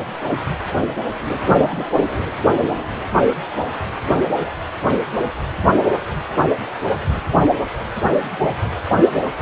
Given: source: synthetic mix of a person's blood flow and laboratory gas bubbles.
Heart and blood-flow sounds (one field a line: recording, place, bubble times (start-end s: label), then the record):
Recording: Doppler ultrasound of blood flow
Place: precordium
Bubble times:
1.57-1.85 s: bubbles
1.95-2.05 s: bubbles
From the record:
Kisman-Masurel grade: 113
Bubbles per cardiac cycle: 1 to 2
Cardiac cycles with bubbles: 1 to 10%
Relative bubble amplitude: loud (0.450 to 0.775)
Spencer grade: 1 (occasional bubble signal discernible with the cardiac motion signal, with majority of cardiac periods free of bubbles)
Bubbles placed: anywhere in the cardiac cycle